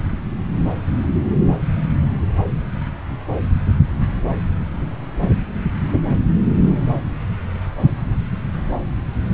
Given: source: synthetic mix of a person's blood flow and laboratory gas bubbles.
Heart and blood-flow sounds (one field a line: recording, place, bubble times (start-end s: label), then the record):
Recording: Doppler ultrasound of blood flow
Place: subclavian vein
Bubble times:
no bubbles
From the record:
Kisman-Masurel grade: 000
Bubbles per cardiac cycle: 0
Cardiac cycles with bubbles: 0%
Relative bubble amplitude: no bubbles discernible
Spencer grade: 0 (complete lack of bubble signals)